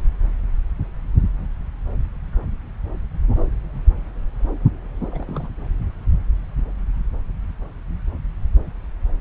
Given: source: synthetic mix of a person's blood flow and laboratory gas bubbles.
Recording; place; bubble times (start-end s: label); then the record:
Doppler ultrasound of blood flow; subclavian vein
5.11-5.49 s: bubbles
From the record:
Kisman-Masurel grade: 211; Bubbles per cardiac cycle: several, 3 to 8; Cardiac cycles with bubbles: 1 to 10%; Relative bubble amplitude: barely perceptible (0.100 to 0.250); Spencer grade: 1 (occasional bubble signal discernible with the cardiac motion signal, with majority of cardiac periods free of bubbles); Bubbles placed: anywhere in the cardiac cycle